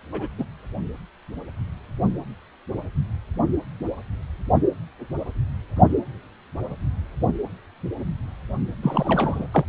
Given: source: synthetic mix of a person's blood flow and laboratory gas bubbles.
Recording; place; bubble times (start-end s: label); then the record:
Doppler ultrasound of blood flow; precordium
0.12-0.28 s: bubbles
0.38-0.45 s: bubbles
8.82-9.47 s: bubbles
9.52-9.65 s: bubbles
From the record:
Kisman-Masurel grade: 222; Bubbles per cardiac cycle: several, 3 to 8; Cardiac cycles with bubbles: 10 to 50%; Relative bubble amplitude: moderate (0.250 to 0.450); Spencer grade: 2 (many but less than half of the cardiac periods contain bubble signals, singularly or in groups); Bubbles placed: only in the low amplitude regions of the cardiac cycle